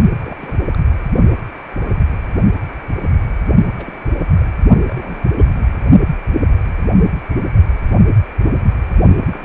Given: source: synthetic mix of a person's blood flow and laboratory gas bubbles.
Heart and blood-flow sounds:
Doppler ultrasound of blood flow; precordium
0.24-0.66 s: bubbles
0.74-0.77 s: bubbles
3.77-3.99 s: bubbles
4.19-4.27 s: bubbles
4.40-4.52 s: bubbles
4.87-5.42 s: bubbles
5.55-5.65 s: bubbles
5.67-5.76 s: bubbles
9.21-9.45 s: bubbles
From the record:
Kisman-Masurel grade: 221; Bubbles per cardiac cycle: several, 3 to 8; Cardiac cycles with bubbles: 10 to 50%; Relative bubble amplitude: barely perceptible (0.100 to 0.250); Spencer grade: 2 (many but less than half of the cardiac periods contain bubble signals, singularly or in groups); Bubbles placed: only in the low amplitude regions of the cardiac cycle

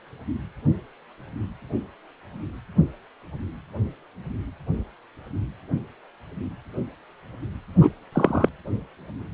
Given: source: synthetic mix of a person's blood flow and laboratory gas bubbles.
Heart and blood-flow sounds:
Doppler ultrasound of blood flow; precordium
7.80-7.90 s: bubbles
8.12-8.49 s: bubbles
From the record:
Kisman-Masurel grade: 123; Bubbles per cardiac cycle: 1 to 2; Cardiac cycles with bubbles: 10 to 50%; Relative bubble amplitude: loud (0.450 to 0.775); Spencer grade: 2 (many but less than half of the cardiac periods contain bubble signals, singularly or in groups); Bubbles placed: anywhere in the cardiac cycle

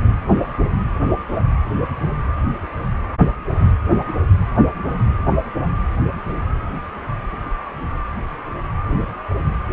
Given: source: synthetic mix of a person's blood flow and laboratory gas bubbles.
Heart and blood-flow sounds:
Doppler ultrasound of blood flow; precordium
no bubbles
From the record:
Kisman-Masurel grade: 000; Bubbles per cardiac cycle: 0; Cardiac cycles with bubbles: 0%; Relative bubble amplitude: no bubbles discernible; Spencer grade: 0 (complete lack of bubble signals)

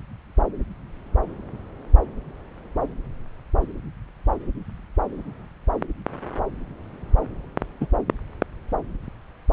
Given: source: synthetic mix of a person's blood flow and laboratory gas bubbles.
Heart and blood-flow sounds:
Doppler ultrasound of blood flow; subclavian vein
7.80-7.86 s: bubbles
From the record:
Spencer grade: 1 (occasional bubble signal discernible with the cardiac motion signal, with majority of cardiac periods free of bubbles); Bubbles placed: anywhere in the cardiac cycle

